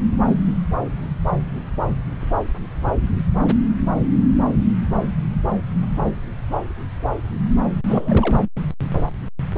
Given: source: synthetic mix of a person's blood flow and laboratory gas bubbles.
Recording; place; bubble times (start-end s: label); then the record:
Doppler ultrasound of blood flow; subclavian vein
7.87-8.42 s: bubbles
From the record:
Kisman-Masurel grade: 222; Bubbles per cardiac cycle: several, 3 to 8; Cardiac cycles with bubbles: 10 to 50%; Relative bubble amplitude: moderate (0.250 to 0.450); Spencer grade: 2 (many but less than half of the cardiac periods contain bubble signals, singularly or in groups); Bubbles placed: anywhere in the cardiac cycle